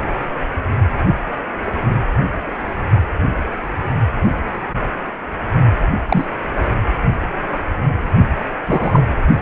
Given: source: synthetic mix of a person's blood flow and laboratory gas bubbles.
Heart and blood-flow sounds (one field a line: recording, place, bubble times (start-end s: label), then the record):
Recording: Doppler ultrasound of blood flow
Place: precordium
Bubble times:
6.08-6.25 s: bubbles
8.67-9.04 s: bubbles
From the record:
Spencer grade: 2 (many but less than half of the cardiac periods contain bubble signals, singularly or in groups)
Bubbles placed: only in the low amplitude regions of the cardiac cycle